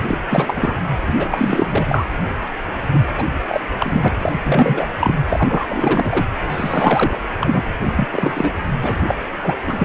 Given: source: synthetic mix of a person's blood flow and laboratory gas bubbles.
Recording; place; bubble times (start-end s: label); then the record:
Doppler ultrasound of blood flow; precordium
0.08-0.20 s: bubbles
0.28-0.78 s: bubbles
1.06-1.28 s: bubbles
1.30-1.86 s: bubbles
1.89-2.06 s: bubbles
2.93-3.01 s: bubbles
3.17-3.24 s: bubbles
3.49-3.60 s: bubbles
3.78-4.08 s: bubbles
4.19-4.32 s: bubbles
4.44-4.86 s: bubbles
4.99-5.15 s: bubbles
5.26-5.67 s: bubbles
5.71-6.27 s: bubbles
6.51-7.18 s: bubbles
7.40-7.64 s: bubbles
7.85-7.92 s: bubbles
7.96-8.52 s: bubbles
8.80-8.95 s: bubbles
9.03-9.16 s: bubbles
9.41-9.56 s: bubbles
9.67-9.85 s: bubbles
From the record:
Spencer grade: 3 (all of the cardiac periods contain showers or single bubble signals, but not dominating or overriding the cardiac motion signals); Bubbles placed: anywhere in the cardiac cycle